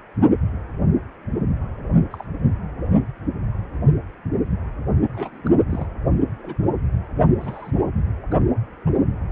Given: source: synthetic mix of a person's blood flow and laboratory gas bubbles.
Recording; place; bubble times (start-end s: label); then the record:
Doppler ultrasound of blood flow; precordium
2.11-2.25 s: bubbles
5.13-5.50 s: bubbles
5.69-5.88 s: bubbles
6.39-6.67 s: bubbles
7.40-7.71 s: bubbles
8.31-8.34 s: bubbles
8.87-8.90 s: bubbles
From the record:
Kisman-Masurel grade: 121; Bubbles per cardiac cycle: 1 to 2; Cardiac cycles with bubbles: 10 to 50%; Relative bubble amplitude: barely perceptible (0.100 to 0.250); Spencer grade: 2 (many but less than half of the cardiac periods contain bubble signals, singularly or in groups); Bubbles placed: anywhere in the cardiac cycle